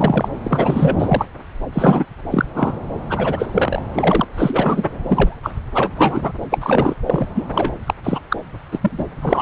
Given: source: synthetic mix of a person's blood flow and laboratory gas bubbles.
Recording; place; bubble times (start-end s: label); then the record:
Doppler ultrasound of blood flow; subclavian vein
0.00-0.29 s: bubbles
0.43-0.96 s: bubbles
0.98-1.27 s: bubbles
1.73-2.05 s: bubbles
2.31-2.45 s: bubbles
2.54-2.80 s: bubbles
3.09-3.82 s: bubbles
3.94-4.27 s: bubbles
4.37-4.83 s: bubbles
5.08-5.37 s: bubbles
5.42-5.51 s: bubbles
5.75-5.92 s: bubbles
5.97-6.32 s: bubbles
6.50-6.96 s: bubbles
7.06-7.26 s: bubbles
7.35-7.45 s: bubbles
7.51-7.71 s: bubbles
7.86-7.94 s: bubbles
8.04-8.20 s: bubbles
8.29-8.37 s: bubbles
8.71-9.14 s: bubbles
9.21-9.42 s: bubbles
From the record:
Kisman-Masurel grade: 243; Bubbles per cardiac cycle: several, 3 to 8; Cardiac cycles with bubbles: 100%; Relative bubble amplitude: loud (0.450 to 0.775); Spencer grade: 3 (all of the cardiac periods contain showers or single bubble signals, but not dominating or overriding the cardiac motion signals); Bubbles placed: anywhere in the cardiac cycle